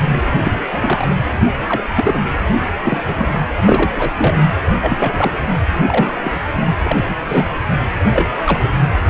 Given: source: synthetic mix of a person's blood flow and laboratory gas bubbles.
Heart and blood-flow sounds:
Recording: Doppler ultrasound of blood flow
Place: precordium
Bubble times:
0.12-0.20 s: bubbles
0.43-0.55 s: bubbles
0.71-1.08 s: bubbles
1.33-1.39 s: bubbles
1.69-1.81 s: bubbles
1.95-2.19 s: bubbles
2.84-3.40 s: bubbles
3.65-3.92 s: bubbles
3.96-4.12 s: bubbles
4.18-4.55 s: bubbles
4.80-5.32 s: bubbles
5.87-6.14 s: bubbles
6.22-6.32 s: bubbles
6.83-6.97 s: bubbles
7.08-7.15 s: bubbles
7.21-7.50 s: bubbles
8.13-8.29 s: bubbles
8.44-8.59 s: bubbles
8.62-8.70 s: bubbles
9.03-9.10 s: bubbles
From the record:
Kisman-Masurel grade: 242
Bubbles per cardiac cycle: several, 3 to 8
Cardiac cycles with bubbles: 100%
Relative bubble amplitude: moderate (0.250 to 0.450)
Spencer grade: 3 (all of the cardiac periods contain showers or single bubble signals, but not dominating or overriding the cardiac motion signals)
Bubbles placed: anywhere in the cardiac cycle

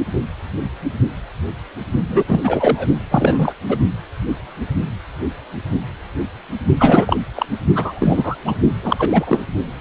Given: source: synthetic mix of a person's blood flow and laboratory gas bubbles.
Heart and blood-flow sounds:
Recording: Doppler ultrasound of blood flow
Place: precordium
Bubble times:
2.08-2.24 s: bubbles
2.28-2.88 s: bubbles
3.10-3.53 s: bubbles
3.69-3.77 s: bubbles
6.78-7.17 s: bubbles
7.35-7.46 s: bubbles
7.50-7.57 s: bubbles
7.75-8.36 s: bubbles
8.45-8.55 s: bubbles
8.82-9.43 s: bubbles
From the record:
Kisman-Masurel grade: 333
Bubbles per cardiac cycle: rolling drumbeat, 9 or more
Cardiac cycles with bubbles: 50 to 99%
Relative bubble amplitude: loud (0.450 to 0.775)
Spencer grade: 3 (all of the cardiac periods contain showers or single bubble signals, but not dominating or overriding the cardiac motion signals)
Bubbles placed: only in the low amplitude regions of the cardiac cycle

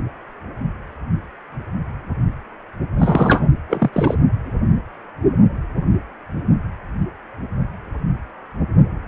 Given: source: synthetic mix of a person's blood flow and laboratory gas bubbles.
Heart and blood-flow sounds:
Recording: Doppler ultrasound of blood flow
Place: precordium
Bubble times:
2.98-3.48 s: bubbles
3.68-3.90 s: bubbles
3.92-4.15 s: bubbles
From the record:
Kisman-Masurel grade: 213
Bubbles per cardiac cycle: several, 3 to 8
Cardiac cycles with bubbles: 1 to 10%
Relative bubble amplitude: loud (0.450 to 0.775)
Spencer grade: 1 (occasional bubble signal discernible with the cardiac motion signal, with majority of cardiac periods free of bubbles)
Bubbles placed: anywhere in the cardiac cycle

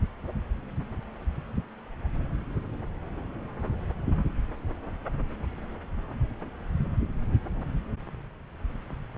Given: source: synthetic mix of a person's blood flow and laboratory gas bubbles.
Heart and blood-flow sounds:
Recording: Doppler ultrasound of blood flow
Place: subclavian vein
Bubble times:
no bubbles
From the record:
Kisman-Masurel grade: 000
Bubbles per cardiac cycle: 0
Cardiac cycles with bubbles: 0%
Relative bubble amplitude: no bubbles discernible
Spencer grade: 0 (complete lack of bubble signals)

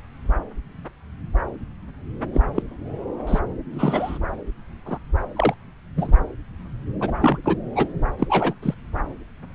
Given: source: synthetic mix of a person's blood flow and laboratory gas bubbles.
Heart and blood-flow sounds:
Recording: Doppler ultrasound of blood flow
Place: subclavian vein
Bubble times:
2.33-2.42 s: bubbles
2.56-2.62 s: bubbles
3.27-3.40 s: bubbles
3.74-4.18 s: bubbles
4.86-4.99 s: bubbles
5.35-5.54 s: bubbles
5.96-6.12 s: bubbles
7.00-7.12 s: bubbles
7.21-7.38 s: bubbles
7.44-7.56 s: bubbles
7.75-7.87 s: bubbles
8.19-8.54 s: bubbles
8.62-8.74 s: bubbles
From the record:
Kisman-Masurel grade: 232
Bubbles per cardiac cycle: several, 3 to 8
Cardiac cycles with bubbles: 50 to 99%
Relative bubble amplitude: moderate (0.250 to 0.450)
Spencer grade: 3 (all of the cardiac periods contain showers or single bubble signals, but not dominating or overriding the cardiac motion signals)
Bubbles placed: anywhere in the cardiac cycle

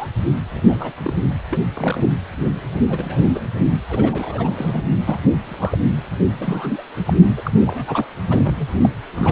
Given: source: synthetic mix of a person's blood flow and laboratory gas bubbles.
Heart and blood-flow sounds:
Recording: Doppler ultrasound of blood flow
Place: precordium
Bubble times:
0.00-0.07 s: bubbles
0.51-0.93 s: bubbles
1.04-1.13 s: bubbles
1.51-1.62 s: bubbles
1.73-2.12 s: bubbles
2.90-3.21 s: bubbles
3.31-3.40 s: bubbles
3.89-4.83 s: bubbles
5.06-5.18 s: bubbles
5.44-5.78 s: bubbles
6.38-6.83 s: bubbles
7.05-7.13 s: bubbles
7.37-7.51 s: bubbles
7.60-8.07 s: bubbles
8.29-8.68 s: bubbles
8.82-8.89 s: bubbles
9.15-9.32 s: bubbles
From the record:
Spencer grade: 3 (all of the cardiac periods contain showers or single bubble signals, but not dominating or overriding the cardiac motion signals)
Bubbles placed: anywhere in the cardiac cycle

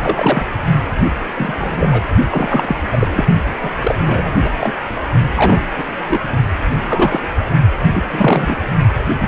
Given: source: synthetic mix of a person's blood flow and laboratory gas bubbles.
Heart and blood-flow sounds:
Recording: Doppler ultrasound of blood flow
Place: precordium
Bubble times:
0.00-0.46 s: bubbles
1.35-2.03 s: bubbles
2.29-2.75 s: bubbles
2.92-3.08 s: bubbles
3.10-3.25 s: bubbles
3.62-3.70 s: bubbles
3.81-3.96 s: bubbles
4.05-4.34 s: bubbles
4.41-4.50 s: bubbles
4.59-4.73 s: bubbles
5.35-5.65 s: bubbles
5.78-5.84 s: bubbles
6.07-6.21 s: bubbles
6.72-7.20 s: bubbles
7.94-8.03 s: bubbles
8.11-8.56 s: bubbles
9.21-9.28 s: bubbles
From the record:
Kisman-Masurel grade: 243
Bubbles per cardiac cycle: several, 3 to 8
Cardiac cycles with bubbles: 100%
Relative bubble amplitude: loud (0.450 to 0.775)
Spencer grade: 3 (all of the cardiac periods contain showers or single bubble signals, but not dominating or overriding the cardiac motion signals)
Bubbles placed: only in the low amplitude regions of the cardiac cycle

